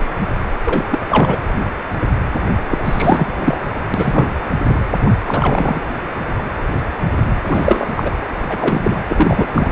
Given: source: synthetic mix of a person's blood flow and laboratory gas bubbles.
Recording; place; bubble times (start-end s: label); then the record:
Doppler ultrasound of blood flow; precordium
0.64-0.99 s: bubbles
1.09-1.38 s: bubbles
2.68-3.33 s: bubbles
3.36-3.57 s: bubbles
3.94-4.35 s: bubbles
4.70-4.81 s: bubbles
5.02-5.11 s: bubbles
5.27-5.82 s: bubbles
7.45-7.93 s: bubbles
7.96-8.16 s: bubbles
8.49-8.58 s: bubbles
8.61-8.99 s: bubbles
9.09-9.72 s: bubbles
From the record:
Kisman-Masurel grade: 333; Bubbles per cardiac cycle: rolling drumbeat, 9 or more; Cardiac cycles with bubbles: 50 to 99%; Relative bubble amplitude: loud (0.450 to 0.775); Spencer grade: 3 (all of the cardiac periods contain showers or single bubble signals, but not dominating or overriding the cardiac motion signals); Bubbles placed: anywhere in the cardiac cycle